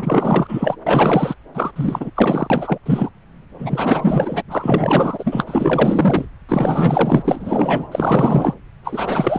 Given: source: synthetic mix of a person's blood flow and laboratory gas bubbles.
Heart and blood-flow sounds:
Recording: Doppler ultrasound of blood flow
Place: subclavian vein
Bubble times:
0.00-0.76 s: bubbles
0.86-1.34 s: bubbles
1.54-1.71 s: bubbles
1.75-2.10 s: bubbles
2.15-2.48 s: bubbles
2.50-2.78 s: bubbles
2.85-3.10 s: bubbles
3.59-4.42 s: bubbles
4.51-6.25 s: bubbles
6.48-7.88 s: bubbles
7.91-8.54 s: bubbles
8.84-9.39 s: bubbles
From the record:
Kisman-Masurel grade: 444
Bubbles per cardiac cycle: continuous sound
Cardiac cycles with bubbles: 100%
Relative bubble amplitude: maximal (0.775 to 0.999)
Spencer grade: 4 (maximum detectable bubble signal sounding continuously throughout systole and diastole of every cardiac period, and overriding the amplitude of the normal cardiac signals)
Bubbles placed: anywhere in the cardiac cycle

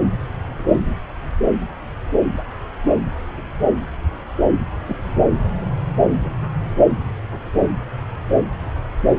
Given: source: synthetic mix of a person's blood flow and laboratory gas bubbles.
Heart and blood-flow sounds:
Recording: Doppler ultrasound of blood flow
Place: subclavian vein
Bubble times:
0.58-0.95 s: bubbles
4.88-4.96 s: bubbles
From the record:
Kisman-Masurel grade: 123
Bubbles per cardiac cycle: 1 to 2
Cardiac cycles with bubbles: 10 to 50%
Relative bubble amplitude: loud (0.450 to 0.775)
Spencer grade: 2 (many but less than half of the cardiac periods contain bubble signals, singularly or in groups)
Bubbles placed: anywhere in the cardiac cycle

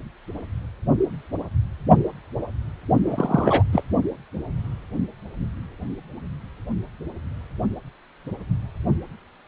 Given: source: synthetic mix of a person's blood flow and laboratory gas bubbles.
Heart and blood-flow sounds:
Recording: Doppler ultrasound of blood flow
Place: precordium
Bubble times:
3.06-3.63 s: bubbles
3.73-3.83 s: bubbles
From the record:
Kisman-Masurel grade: 222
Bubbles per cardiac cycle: several, 3 to 8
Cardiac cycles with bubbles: 10 to 50%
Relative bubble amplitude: moderate (0.250 to 0.450)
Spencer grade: 2 (many but less than half of the cardiac periods contain bubble signals, singularly or in groups)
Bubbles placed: only in the low amplitude regions of the cardiac cycle

